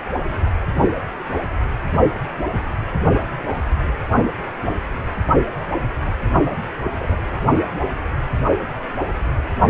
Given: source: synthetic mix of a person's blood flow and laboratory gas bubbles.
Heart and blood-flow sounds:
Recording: Doppler ultrasound of blood flow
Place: precordium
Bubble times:
6.98-7.18 s: bubbles
From the record:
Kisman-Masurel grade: 111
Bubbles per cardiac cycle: 1 to 2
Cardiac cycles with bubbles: 1 to 10%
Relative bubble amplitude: barely perceptible (0.100 to 0.250)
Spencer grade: 1 (occasional bubble signal discernible with the cardiac motion signal, with majority of cardiac periods free of bubbles)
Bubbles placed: anywhere in the cardiac cycle

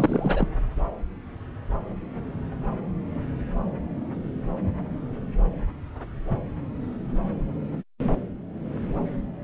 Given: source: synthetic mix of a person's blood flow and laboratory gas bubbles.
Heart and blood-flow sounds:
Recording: Doppler ultrasound of blood flow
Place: subclavian vein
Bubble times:
0.00-0.47 s: bubbles
From the record:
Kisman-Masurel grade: 212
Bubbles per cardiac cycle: several, 3 to 8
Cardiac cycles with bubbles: 1 to 10%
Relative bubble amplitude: moderate (0.250 to 0.450)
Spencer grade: 1 (occasional bubble signal discernible with the cardiac motion signal, with majority of cardiac periods free of bubbles)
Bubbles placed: anywhere in the cardiac cycle

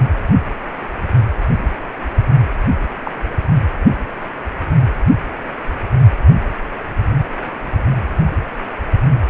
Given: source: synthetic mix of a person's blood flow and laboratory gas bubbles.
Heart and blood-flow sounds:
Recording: Doppler ultrasound of blood flow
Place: precordium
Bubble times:
3.04-3.11 s: bubbles
From the record:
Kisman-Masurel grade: 112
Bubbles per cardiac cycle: 1 to 2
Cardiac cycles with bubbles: 1 to 10%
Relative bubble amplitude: moderate (0.250 to 0.450)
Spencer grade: 1 (occasional bubble signal discernible with the cardiac motion signal, with majority of cardiac periods free of bubbles)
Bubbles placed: anywhere in the cardiac cycle

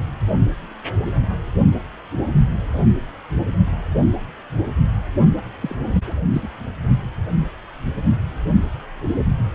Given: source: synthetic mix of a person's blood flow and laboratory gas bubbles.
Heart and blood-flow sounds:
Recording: Doppler ultrasound of blood flow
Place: precordium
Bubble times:
5.62-5.75 s: bubbles
5.93-6.01 s: bubbles
6.06-6.14 s: bubbles
6.33-6.47 s: bubbles
From the record:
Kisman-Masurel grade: 222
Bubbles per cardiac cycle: several, 3 to 8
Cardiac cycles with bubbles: 10 to 50%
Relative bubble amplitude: moderate (0.250 to 0.450)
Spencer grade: 2 (many but less than half of the cardiac periods contain bubble signals, singularly or in groups)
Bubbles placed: only in the low amplitude regions of the cardiac cycle

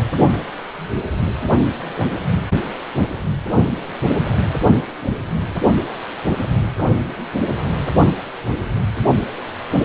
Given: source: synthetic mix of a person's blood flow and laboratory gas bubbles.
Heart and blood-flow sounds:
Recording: Doppler ultrasound of blood flow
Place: precordium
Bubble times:
0.00-0.10 s: bubbles
From the record:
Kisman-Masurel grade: 221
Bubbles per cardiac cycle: several, 3 to 8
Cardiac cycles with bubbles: 10 to 50%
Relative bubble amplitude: barely perceptible (0.100 to 0.250)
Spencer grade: 2 (many but less than half of the cardiac periods contain bubble signals, singularly or in groups)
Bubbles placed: only in the low amplitude regions of the cardiac cycle

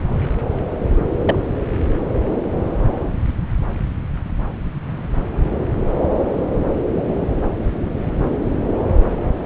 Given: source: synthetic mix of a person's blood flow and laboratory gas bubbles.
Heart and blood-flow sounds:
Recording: Doppler ultrasound of blood flow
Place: subclavian vein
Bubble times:
1.26-1.35 s: bubbles
From the record:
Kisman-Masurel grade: 113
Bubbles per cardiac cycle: 1 to 2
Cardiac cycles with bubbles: 1 to 10%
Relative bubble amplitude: loud (0.450 to 0.775)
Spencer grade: 1 (occasional bubble signal discernible with the cardiac motion signal, with majority of cardiac periods free of bubbles)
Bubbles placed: anywhere in the cardiac cycle

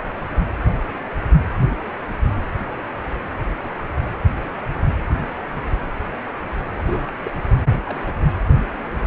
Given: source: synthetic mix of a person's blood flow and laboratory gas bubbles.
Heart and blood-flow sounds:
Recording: Doppler ultrasound of blood flow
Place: precordium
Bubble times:
6.75-7.10 s: bubbles
7.23-7.31 s: bubbles
7.36-7.46 s: bubbles
7.86-8.15 s: bubbles
From the record:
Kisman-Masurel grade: 221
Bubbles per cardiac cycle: several, 3 to 8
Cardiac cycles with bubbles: 10 to 50%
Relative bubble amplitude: barely perceptible (0.100 to 0.250)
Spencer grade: 2 (many but less than half of the cardiac periods contain bubble signals, singularly or in groups)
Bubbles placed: anywhere in the cardiac cycle

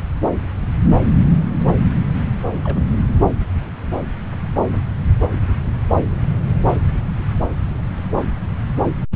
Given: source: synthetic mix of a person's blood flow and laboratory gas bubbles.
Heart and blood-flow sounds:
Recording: Doppler ultrasound of blood flow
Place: subclavian vein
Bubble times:
2.64-2.98 s: bubbles
From the record:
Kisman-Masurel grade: 111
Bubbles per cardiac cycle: 1 to 2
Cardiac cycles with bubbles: 1 to 10%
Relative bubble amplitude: barely perceptible (0.100 to 0.250)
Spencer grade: 1 (occasional bubble signal discernible with the cardiac motion signal, with majority of cardiac periods free of bubbles)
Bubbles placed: anywhere in the cardiac cycle

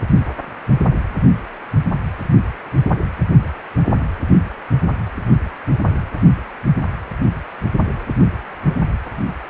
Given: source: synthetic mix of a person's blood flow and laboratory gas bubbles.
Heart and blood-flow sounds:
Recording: Doppler ultrasound of blood flow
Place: precordium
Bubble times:
no bubbles
From the record:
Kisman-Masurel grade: 000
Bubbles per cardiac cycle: 0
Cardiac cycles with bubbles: 0%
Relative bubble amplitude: no bubbles discernible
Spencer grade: 0 (complete lack of bubble signals)

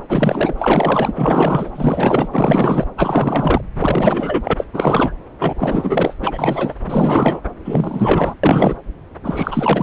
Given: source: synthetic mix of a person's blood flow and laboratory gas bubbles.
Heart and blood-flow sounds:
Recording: Doppler ultrasound of blood flow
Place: subclavian vein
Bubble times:
0.09-0.55 s: bubbles
0.57-1.13 s: bubbles
1.15-1.71 s: bubbles
1.75-2.28 s: bubbles
2.31-2.85 s: bubbles
2.97-3.61 s: bubbles
3.75-4.54 s: bubbles
4.57-4.66 s: bubbles
4.73-5.12 s: bubbles
5.39-5.54 s: bubbles
5.58-6.16 s: bubbles
6.21-6.75 s: bubbles
6.86-7.41 s: bubbles
7.65-8.34 s: bubbles
8.43-8.77 s: bubbles
9.22-9.83 s: bubbles
From the record:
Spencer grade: 4 (maximum detectable bubble signal sounding continuously throughout systole and diastole of every cardiac period, and overriding the amplitude of the normal cardiac signals)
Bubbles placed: anywhere in the cardiac cycle

